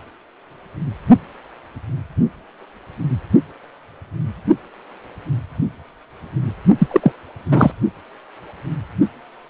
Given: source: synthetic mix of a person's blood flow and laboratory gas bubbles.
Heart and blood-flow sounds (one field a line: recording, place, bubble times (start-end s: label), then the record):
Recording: Doppler ultrasound of blood flow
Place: precordium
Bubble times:
6.78-6.88 s: bubbles
6.91-7.12 s: bubbles
7.51-7.72 s: bubbles
From the record:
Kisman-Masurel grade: 213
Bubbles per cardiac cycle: several, 3 to 8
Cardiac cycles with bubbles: 1 to 10%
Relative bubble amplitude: loud (0.450 to 0.775)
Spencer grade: 1 (occasional bubble signal discernible with the cardiac motion signal, with majority of cardiac periods free of bubbles)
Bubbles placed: only in the low amplitude regions of the cardiac cycle